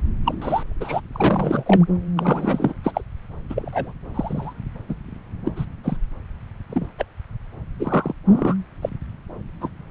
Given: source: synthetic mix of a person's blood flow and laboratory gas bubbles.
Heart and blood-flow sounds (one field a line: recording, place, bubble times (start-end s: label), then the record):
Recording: Doppler ultrasound of blood flow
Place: subclavian vein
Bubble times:
0.26-0.34 s: bubbles
0.41-0.63 s: bubbles
0.80-1.00 s: bubbles
1.14-1.64 s: bubbles
1.66-1.84 s: bubbles
2.17-2.73 s: bubbles
2.83-2.92 s: bubbles
2.94-3.02 s: bubbles
3.49-3.92 s: bubbles
4.14-4.53 s: bubbles
4.89-4.95 s: bubbles
5.45-5.53 s: bubbles
5.56-5.65 s: bubbles
5.84-5.97 s: bubbles
6.69-6.87 s: bubbles
6.98-7.05 s: bubbles
7.79-8.13 s: bubbles
8.26-8.55 s: bubbles
8.82-8.89 s: bubbles
9.61-9.70 s: bubbles
From the record:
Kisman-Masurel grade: 242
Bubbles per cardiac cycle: several, 3 to 8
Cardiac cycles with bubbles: 100%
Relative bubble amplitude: moderate (0.250 to 0.450)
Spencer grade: 3 (all of the cardiac periods contain showers or single bubble signals, but not dominating or overriding the cardiac motion signals)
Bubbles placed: anywhere in the cardiac cycle